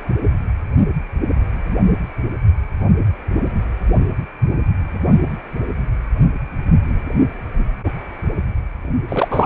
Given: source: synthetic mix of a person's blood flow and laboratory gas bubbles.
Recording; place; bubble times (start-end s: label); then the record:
Doppler ultrasound of blood flow; precordium
9.09-9.46 s: bubbles
From the record:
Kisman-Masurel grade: 213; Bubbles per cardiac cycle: several, 3 to 8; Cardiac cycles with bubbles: 1 to 10%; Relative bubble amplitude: loud (0.450 to 0.775); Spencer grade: 1 (occasional bubble signal discernible with the cardiac motion signal, with majority of cardiac periods free of bubbles); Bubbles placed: anywhere in the cardiac cycle